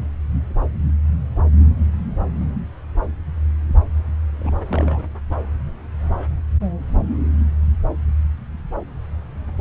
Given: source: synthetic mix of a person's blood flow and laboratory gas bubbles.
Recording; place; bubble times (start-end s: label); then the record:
Doppler ultrasound of blood flow; subclavian vein
4.38-4.53 s: bubbles
4.70-5.06 s: bubbles
From the record:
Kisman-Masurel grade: 211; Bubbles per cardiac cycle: several, 3 to 8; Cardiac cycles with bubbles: 1 to 10%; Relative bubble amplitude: barely perceptible (0.100 to 0.250); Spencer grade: 1 (occasional bubble signal discernible with the cardiac motion signal, with majority of cardiac periods free of bubbles); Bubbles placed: anywhere in the cardiac cycle